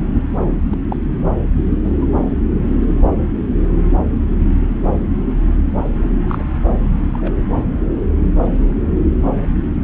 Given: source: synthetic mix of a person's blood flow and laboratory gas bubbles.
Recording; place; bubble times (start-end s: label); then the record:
Doppler ultrasound of blood flow; subclavian vein
0.70-0.78 s: bubbles
0.89-0.96 s: bubbles
1.84-2.06 s: bubbles
6.28-6.44 s: bubbles
7.12-7.34 s: bubbles
8.61-8.74 s: bubbles
From the record:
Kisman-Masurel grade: 121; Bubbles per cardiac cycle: 1 to 2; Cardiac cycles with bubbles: 10 to 50%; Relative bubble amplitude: barely perceptible (0.100 to 0.250); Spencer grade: 2 (many but less than half of the cardiac periods contain bubble signals, singularly or in groups); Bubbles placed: anywhere in the cardiac cycle